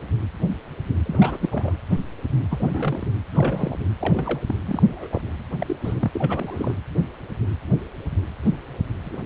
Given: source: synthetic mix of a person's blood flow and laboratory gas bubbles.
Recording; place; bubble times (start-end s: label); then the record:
Doppler ultrasound of blood flow; precordium
1.05-1.38 s: bubbles
1.41-1.73 s: bubbles
2.50-3.05 s: bubbles
3.33-3.77 s: bubbles
4.00-4.39 s: bubbles
4.47-4.54 s: bubbles
4.66-4.83 s: bubbles
4.92-5.07 s: bubbles
5.11-5.18 s: bubbles
5.59-5.77 s: bubbles
5.84-6.11 s: bubbles
6.13-6.74 s: bubbles
9.04-9.17 s: bubbles
9.21-9.26 s: bubbles
From the record:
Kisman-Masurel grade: 221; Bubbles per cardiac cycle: several, 3 to 8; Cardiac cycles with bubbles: 10 to 50%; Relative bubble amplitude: barely perceptible (0.100 to 0.250); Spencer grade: 2 (many but less than half of the cardiac periods contain bubble signals, singularly or in groups); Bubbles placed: anywhere in the cardiac cycle